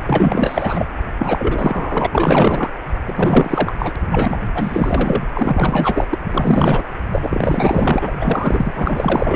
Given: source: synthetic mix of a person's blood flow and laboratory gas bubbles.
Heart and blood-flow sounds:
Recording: Doppler ultrasound of blood flow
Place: precordium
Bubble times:
0.07-0.86 s: bubbles
1.18-2.06 s: bubbles
2.12-2.71 s: bubbles
3.02-3.73 s: bubbles
3.79-3.94 s: bubbles
4.11-4.38 s: bubbles
4.54-5.26 s: bubbles
5.34-6.06 s: bubbles
6.11-6.18 s: bubbles
6.33-6.83 s: bubbles
7.11-8.16 s: bubbles
8.19-8.72 s: bubbles
8.75-9.36 s: bubbles
From the record:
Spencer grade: 4 (maximum detectable bubble signal sounding continuously throughout systole and diastole of every cardiac period, and overriding the amplitude of the normal cardiac signals)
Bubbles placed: anywhere in the cardiac cycle

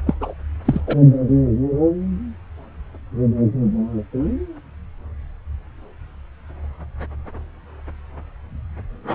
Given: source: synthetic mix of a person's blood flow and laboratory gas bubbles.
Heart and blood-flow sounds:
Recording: Doppler ultrasound of blood flow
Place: subclavian vein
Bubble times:
0.06-0.14 s: bubbles
0.20-0.33 s: bubbles
0.65-0.81 s: bubbles
0.87-0.96 s: bubbles
From the record:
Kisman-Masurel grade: 213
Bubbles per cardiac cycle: several, 3 to 8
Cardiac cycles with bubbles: 1 to 10%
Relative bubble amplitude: loud (0.450 to 0.775)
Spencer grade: 1 (occasional bubble signal discernible with the cardiac motion signal, with majority of cardiac periods free of bubbles)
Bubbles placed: anywhere in the cardiac cycle

